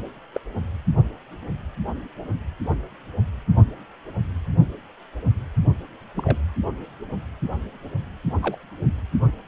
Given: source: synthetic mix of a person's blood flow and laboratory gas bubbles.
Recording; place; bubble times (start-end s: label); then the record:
Doppler ultrasound of blood flow; precordium
0.34-0.40 s: bubbles
6.17-6.37 s: bubbles
8.42-8.56 s: bubbles
From the record:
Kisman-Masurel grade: 122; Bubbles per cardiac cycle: 1 to 2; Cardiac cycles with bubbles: 10 to 50%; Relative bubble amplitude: moderate (0.250 to 0.450); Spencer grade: 2 (many but less than half of the cardiac periods contain bubble signals, singularly or in groups); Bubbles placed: only in the low amplitude regions of the cardiac cycle